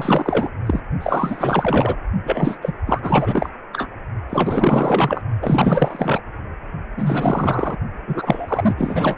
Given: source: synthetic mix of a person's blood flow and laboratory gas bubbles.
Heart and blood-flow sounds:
Doppler ultrasound of blood flow; precordium
0.00-0.49 s: bubbles
0.66-0.80 s: bubbles
1.00-1.97 s: bubbles
2.23-2.58 s: bubbles
2.62-2.73 s: bubbles
2.86-3.50 s: bubbles
3.72-3.88 s: bubbles
4.29-5.21 s: bubbles
5.42-6.21 s: bubbles
6.96-7.76 s: bubbles
8.07-8.74 s: bubbles
8.78-9.16 s: bubbles
From the record:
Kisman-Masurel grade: 444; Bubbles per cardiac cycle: continuous sound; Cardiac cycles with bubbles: 100%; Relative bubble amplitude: maximal (0.775 to 0.999); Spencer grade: 4 (maximum detectable bubble signal sounding continuously throughout systole and diastole of every cardiac period, and overriding the amplitude of the normal cardiac signals); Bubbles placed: only in the low amplitude regions of the cardiac cycle

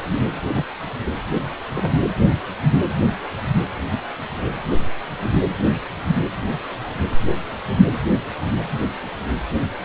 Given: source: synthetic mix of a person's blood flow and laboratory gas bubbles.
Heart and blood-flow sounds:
Doppler ultrasound of blood flow; precordium
0.10-0.22 s: bubbles
0.54-0.65 s: bubbles
1.34-1.42 s: bubbles
1.75-1.90 s: bubbles
From the record:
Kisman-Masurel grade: 121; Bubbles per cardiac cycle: 1 to 2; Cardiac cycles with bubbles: 10 to 50%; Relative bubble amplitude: barely perceptible (0.100 to 0.250); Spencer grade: 2 (many but less than half of the cardiac periods contain bubble signals, singularly or in groups); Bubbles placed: anywhere in the cardiac cycle

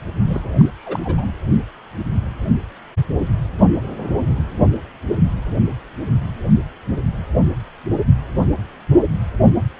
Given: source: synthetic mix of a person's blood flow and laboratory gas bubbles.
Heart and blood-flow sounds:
Doppler ultrasound of blood flow; precordium
0.22-0.51 s: bubbles
0.57-0.69 s: bubbles
0.78-1.25 s: bubbles
From the record:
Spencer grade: 1 (occasional bubble signal discernible with the cardiac motion signal, with majority of cardiac periods free of bubbles); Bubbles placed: anywhere in the cardiac cycle

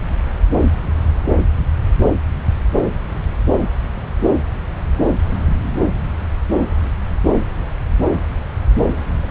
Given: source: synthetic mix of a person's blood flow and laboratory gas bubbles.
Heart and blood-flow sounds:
Doppler ultrasound of blood flow; subclavian vein
9.22-9.30 s: bubbles
From the record:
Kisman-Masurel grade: 111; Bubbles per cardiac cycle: 1 to 2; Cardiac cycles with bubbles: 1 to 10%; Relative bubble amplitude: barely perceptible (0.100 to 0.250); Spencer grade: 1 (occasional bubble signal discernible with the cardiac motion signal, with majority of cardiac periods free of bubbles); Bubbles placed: anywhere in the cardiac cycle

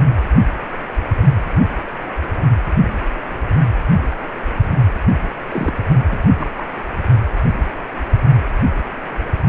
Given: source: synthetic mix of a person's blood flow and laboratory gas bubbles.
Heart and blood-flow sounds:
Doppler ultrasound of blood flow; precordium
5.50-5.83 s: bubbles
6.11-6.18 s: bubbles
6.39-6.51 s: bubbles
6.58-6.64 s: bubbles
From the record:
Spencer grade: 2 (many but less than half of the cardiac periods contain bubble signals, singularly or in groups); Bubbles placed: anywhere in the cardiac cycle

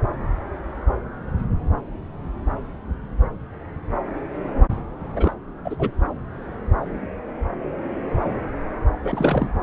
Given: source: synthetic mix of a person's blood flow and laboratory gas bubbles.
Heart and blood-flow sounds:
Doppler ultrasound of blood flow; subclavian vein
5.16-5.33 s: bubbles
5.64-5.75 s: bubbles
5.79-5.91 s: bubbles
9.03-9.51 s: bubbles
From the record:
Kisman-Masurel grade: 222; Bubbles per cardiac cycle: several, 3 to 8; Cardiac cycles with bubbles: 10 to 50%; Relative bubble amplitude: moderate (0.250 to 0.450); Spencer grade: 2 (many but less than half of the cardiac periods contain bubble signals, singularly or in groups); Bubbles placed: anywhere in the cardiac cycle

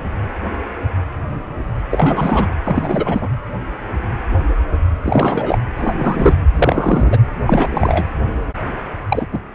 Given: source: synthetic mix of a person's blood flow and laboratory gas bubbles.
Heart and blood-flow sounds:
Doppler ultrasound of blood flow; precordium
1.91-2.48 s: bubbles
2.64-3.28 s: bubbles
5.03-5.59 s: bubbles
5.78-5.95 s: bubbles
5.97-6.36 s: bubbles
6.56-7.18 s: bubbles
7.46-8.07 s: bubbles
9.09-9.27 s: bubbles
9.32-9.39 s: bubbles
From the record:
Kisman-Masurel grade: 333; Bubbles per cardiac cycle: rolling drumbeat, 9 or more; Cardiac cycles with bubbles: 50 to 99%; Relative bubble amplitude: loud (0.450 to 0.775); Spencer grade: 3 (all of the cardiac periods contain showers or single bubble signals, but not dominating or overriding the cardiac motion signals); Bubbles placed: anywhere in the cardiac cycle

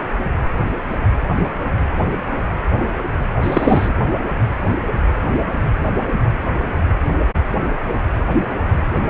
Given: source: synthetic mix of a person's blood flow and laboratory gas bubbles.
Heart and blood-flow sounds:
Doppler ultrasound of blood flow; precordium
3.43-3.93 s: bubbles
From the record:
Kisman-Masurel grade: 213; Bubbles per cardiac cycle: several, 3 to 8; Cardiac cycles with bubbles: 1 to 10%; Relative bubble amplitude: loud (0.450 to 0.775); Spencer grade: 1 (occasional bubble signal discernible with the cardiac motion signal, with majority of cardiac periods free of bubbles); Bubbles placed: anywhere in the cardiac cycle

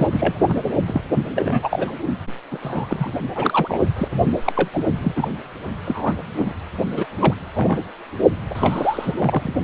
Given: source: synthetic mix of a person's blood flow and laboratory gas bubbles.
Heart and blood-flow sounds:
Doppler ultrasound of blood flow; precordium
0.00-0.07 s: bubbles
0.12-0.36 s: bubbles
0.47-0.65 s: bubbles
0.86-1.01 s: bubbles
1.36-1.92 s: bubbles
2.51-2.57 s: bubbles
2.62-3.11 s: bubbles
3.35-3.81 s: bubbles
3.96-4.08 s: bubbles
4.46-4.53 s: bubbles
4.56-4.71 s: bubbles
4.73-4.84 s: bubbles
5.03-5.12 s: bubbles
5.16-5.29 s: bubbles
5.85-6.14 s: bubbles
6.37-6.52 s: bubbles
6.96-7.06 s: bubbles
7.19-7.34 s: bubbles
7.54-7.79 s: bubbles
8.50-9.54 s: bubbles
From the record:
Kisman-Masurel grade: 242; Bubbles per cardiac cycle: several, 3 to 8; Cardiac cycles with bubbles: 100%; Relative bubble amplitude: moderate (0.250 to 0.450); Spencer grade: 3 (all of the cardiac periods contain showers or single bubble signals, but not dominating or overriding the cardiac motion signals); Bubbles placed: only in the low amplitude regions of the cardiac cycle

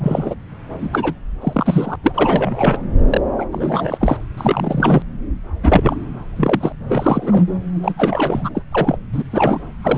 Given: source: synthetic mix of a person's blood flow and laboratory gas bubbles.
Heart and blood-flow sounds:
Doppler ultrasound of blood flow; subclavian vein
0.00-0.34 s: bubbles
0.79-1.14 s: bubbles
1.41-1.96 s: bubbles
2.03-2.81 s: bubbles
3.08-3.21 s: bubbles
3.38-3.46 s: bubbles
3.52-3.98 s: bubbles
4.00-4.17 s: bubbles
4.37-5.02 s: bubbles
5.63-5.95 s: bubbles
6.36-6.72 s: bubbles
6.88-7.46 s: bubbles
7.83-7.92 s: bubbles
7.97-8.63 s: bubbles
8.71-8.97 s: bubbles
9.12-9.23 s: bubbles
9.31-9.62 s: bubbles
9.82-9.98 s: bubbles
From the record:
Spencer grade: 3 (all of the cardiac periods contain showers or single bubble signals, but not dominating or overriding the cardiac motion signals); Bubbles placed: anywhere in the cardiac cycle

